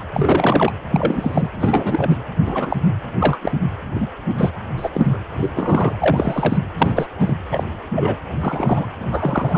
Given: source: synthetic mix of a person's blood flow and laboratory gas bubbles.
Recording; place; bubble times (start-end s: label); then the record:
Doppler ultrasound of blood flow; precordium
0.00-0.02 s: bubbles
0.12-0.72 s: bubbles
0.90-1.49 s: bubbles
1.60-2.17 s: bubbles
2.46-2.77 s: bubbles
3.19-3.38 s: bubbles
3.42-3.52 s: bubbles
3.94-4.08 s: bubbles
4.37-4.51 s: bubbles
4.77-4.89 s: bubbles
4.93-5.19 s: bubbles
5.35-5.93 s: bubbles
5.99-6.58 s: bubbles
6.78-7.07 s: bubbles
7.20-7.34 s: bubbles
7.51-7.64 s: bubbles
7.95-8.18 s: bubbles
8.39-8.86 s: bubbles
8.99-9.58 s: bubbles
From the record:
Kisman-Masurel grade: 243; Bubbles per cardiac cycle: several, 3 to 8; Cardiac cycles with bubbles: 100%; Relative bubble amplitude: loud (0.450 to 0.775); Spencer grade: 3 (all of the cardiac periods contain showers or single bubble signals, but not dominating or overriding the cardiac motion signals); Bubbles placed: anywhere in the cardiac cycle